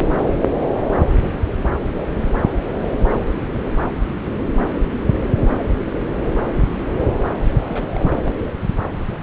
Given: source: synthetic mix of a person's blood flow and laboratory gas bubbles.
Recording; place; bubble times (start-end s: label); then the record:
Doppler ultrasound of blood flow; subclavian vein
7.67-7.88 s: bubbles
7.94-8.32 s: bubbles
From the record:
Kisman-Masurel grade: 211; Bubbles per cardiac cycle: several, 3 to 8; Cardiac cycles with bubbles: 1 to 10%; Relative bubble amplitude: barely perceptible (0.100 to 0.250); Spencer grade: 1 (occasional bubble signal discernible with the cardiac motion signal, with majority of cardiac periods free of bubbles); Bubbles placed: anywhere in the cardiac cycle